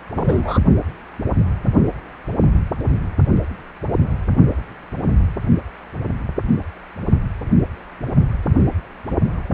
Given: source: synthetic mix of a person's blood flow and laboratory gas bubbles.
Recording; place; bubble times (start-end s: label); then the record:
Doppler ultrasound of blood flow; precordium
0.16-0.58 s: bubbles
From the record:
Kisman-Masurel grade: 113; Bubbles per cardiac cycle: 1 to 2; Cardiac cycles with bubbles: 1 to 10%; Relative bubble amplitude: loud (0.450 to 0.775); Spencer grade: 1 (occasional bubble signal discernible with the cardiac motion signal, with majority of cardiac periods free of bubbles); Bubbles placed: only in the low amplitude regions of the cardiac cycle